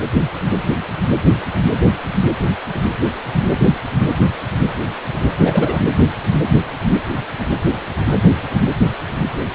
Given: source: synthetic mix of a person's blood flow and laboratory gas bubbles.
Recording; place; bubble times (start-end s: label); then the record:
Doppler ultrasound of blood flow; precordium
5.40-5.80 s: bubbles
From the record:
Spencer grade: 1 (occasional bubble signal discernible with the cardiac motion signal, with majority of cardiac periods free of bubbles); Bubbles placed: anywhere in the cardiac cycle